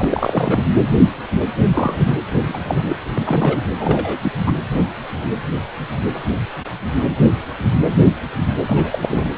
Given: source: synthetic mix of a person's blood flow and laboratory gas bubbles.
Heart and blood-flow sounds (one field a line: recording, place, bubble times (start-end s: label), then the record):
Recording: Doppler ultrasound of blood flow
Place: precordium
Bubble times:
0.00-0.64 s: bubbles
1.74-2.16 s: bubbles
2.30-2.59 s: bubbles
2.65-2.96 s: bubbles
3.14-3.62 s: bubbles
3.79-4.18 s: bubbles
4.23-4.32 s: bubbles
4.46-4.52 s: bubbles
8.68-8.99 s: bubbles
9.02-9.30 s: bubbles
From the record:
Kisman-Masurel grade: 222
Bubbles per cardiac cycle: several, 3 to 8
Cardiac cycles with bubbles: 10 to 50%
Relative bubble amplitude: moderate (0.250 to 0.450)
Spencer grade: 2 (many but less than half of the cardiac periods contain bubble signals, singularly or in groups)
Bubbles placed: anywhere in the cardiac cycle